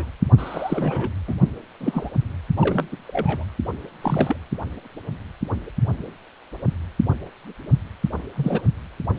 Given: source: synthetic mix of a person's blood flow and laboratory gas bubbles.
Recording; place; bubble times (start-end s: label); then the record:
Doppler ultrasound of blood flow; precordium
0.00-0.07 s: bubbles
0.38-1.11 s: bubbles
1.27-1.34 s: bubbles
1.80-2.10 s: bubbles
2.57-2.88 s: bubbles
2.92-2.97 s: bubbles
3.08-3.44 s: bubbles
4.02-4.36 s: bubbles
8.35-8.61 s: bubbles
From the record:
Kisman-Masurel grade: 232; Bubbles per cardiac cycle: several, 3 to 8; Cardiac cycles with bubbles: 50 to 99%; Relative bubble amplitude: moderate (0.250 to 0.450); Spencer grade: 3 (all of the cardiac periods contain showers or single bubble signals, but not dominating or overriding the cardiac motion signals); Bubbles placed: only in the low amplitude regions of the cardiac cycle